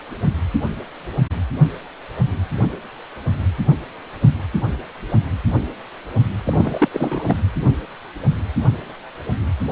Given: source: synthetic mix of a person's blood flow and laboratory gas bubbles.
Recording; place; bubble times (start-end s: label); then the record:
Doppler ultrasound of blood flow; precordium
6.45-6.88 s: bubbles
6.92-7.36 s: bubbles
From the record:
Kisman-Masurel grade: 222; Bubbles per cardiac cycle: several, 3 to 8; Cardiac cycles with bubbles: 10 to 50%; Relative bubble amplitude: moderate (0.250 to 0.450); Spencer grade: 2 (many but less than half of the cardiac periods contain bubble signals, singularly or in groups); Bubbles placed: only in the low amplitude regions of the cardiac cycle